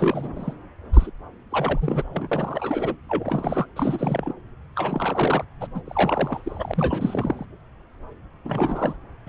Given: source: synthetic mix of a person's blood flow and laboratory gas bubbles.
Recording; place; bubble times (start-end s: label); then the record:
Doppler ultrasound of blood flow; subclavian vein
0.00-0.53 s: bubbles
0.93-1.11 s: bubbles
1.50-2.28 s: bubbles
2.31-2.96 s: bubbles
3.08-3.67 s: bubbles
3.75-4.33 s: bubbles
4.75-5.45 s: bubbles
5.61-5.67 s: bubbles
5.74-5.81 s: bubbles
5.86-7.45 s: bubbles
8.44-8.96 s: bubbles
9.25-9.29 s: bubbles
From the record:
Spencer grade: 3 (all of the cardiac periods contain showers or single bubble signals, but not dominating or overriding the cardiac motion signals); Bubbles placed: anywhere in the cardiac cycle